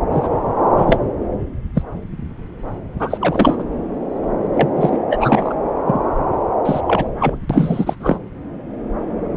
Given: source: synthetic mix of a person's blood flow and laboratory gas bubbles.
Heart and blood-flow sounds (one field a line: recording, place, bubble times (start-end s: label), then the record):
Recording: Doppler ultrasound of blood flow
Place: subclavian vein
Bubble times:
0.12-0.29 s: bubbles
0.77-0.98 s: bubbles
1.74-1.83 s: bubbles
3.00-3.65 s: bubbles
4.53-4.69 s: bubbles
4.75-5.02 s: bubbles
5.10-5.54 s: bubbles
5.86-6.02 s: bubbles
6.65-6.80 s: bubbles
6.86-7.09 s: bubbles
7.19-7.36 s: bubbles
7.50-7.95 s: bubbles
8.00-8.20 s: bubbles
From the record:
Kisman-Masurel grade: 233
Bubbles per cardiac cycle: several, 3 to 8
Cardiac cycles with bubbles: 50 to 99%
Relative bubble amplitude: loud (0.450 to 0.775)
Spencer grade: 3 (all of the cardiac periods contain showers or single bubble signals, but not dominating or overriding the cardiac motion signals)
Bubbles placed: anywhere in the cardiac cycle